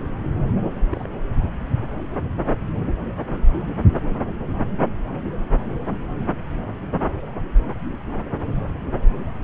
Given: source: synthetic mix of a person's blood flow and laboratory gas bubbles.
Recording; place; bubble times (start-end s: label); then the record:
Doppler ultrasound of blood flow; subclavian vein
0.92-1.07 s: bubbles
From the record:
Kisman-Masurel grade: 111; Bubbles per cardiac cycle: 1 to 2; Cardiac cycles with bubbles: 1 to 10%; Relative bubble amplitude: barely perceptible (0.100 to 0.250); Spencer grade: 1 (occasional bubble signal discernible with the cardiac motion signal, with majority of cardiac periods free of bubbles); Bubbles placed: anywhere in the cardiac cycle